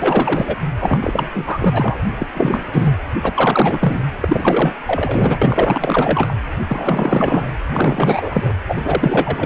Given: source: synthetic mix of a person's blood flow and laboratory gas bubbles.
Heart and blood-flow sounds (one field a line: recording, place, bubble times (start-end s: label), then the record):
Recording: Doppler ultrasound of blood flow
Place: precordium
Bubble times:
0.00-0.56 s: bubbles
0.79-0.98 s: bubbles
1.02-2.06 s: bubbles
2.18-2.27 s: bubbles
2.34-2.65 s: bubbles
2.73-2.92 s: bubbles
3.22-4.01 s: bubbles
4.21-4.75 s: bubbles
4.87-5.38 s: bubbles
5.42-6.34 s: bubbles
6.67-7.52 s: bubbles
7.72-8.53 s: bubbles
8.68-9.46 s: bubbles
From the record:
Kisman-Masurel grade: 444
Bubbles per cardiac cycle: continuous sound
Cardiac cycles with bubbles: 100%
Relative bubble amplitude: maximal (0.775 to 0.999)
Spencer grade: 4 (maximum detectable bubble signal sounding continuously throughout systole and diastole of every cardiac period, and overriding the amplitude of the normal cardiac signals)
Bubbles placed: anywhere in the cardiac cycle